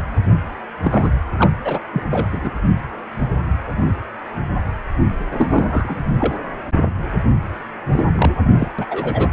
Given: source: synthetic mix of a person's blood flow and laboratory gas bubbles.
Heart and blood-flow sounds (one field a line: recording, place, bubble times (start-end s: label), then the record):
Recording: Doppler ultrasound of blood flow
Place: precordium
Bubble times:
0.00-0.02 s: bubbles
0.82-1.16 s: bubbles
1.37-1.51 s: bubbles
1.64-1.80 s: bubbles
1.93-2.03 s: bubbles
2.10-2.51 s: bubbles
5.31-5.96 s: bubbles
6.18-6.36 s: bubbles
7.92-8.05 s: bubbles
8.15-8.32 s: bubbles
8.59-8.68 s: bubbles
8.79-8.86 s: bubbles
8.89-9.30 s: bubbles
From the record:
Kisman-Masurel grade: 233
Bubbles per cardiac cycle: several, 3 to 8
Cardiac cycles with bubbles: 50 to 99%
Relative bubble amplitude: loud (0.450 to 0.775)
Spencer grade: 3 (all of the cardiac periods contain showers or single bubble signals, but not dominating or overriding the cardiac motion signals)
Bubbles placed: anywhere in the cardiac cycle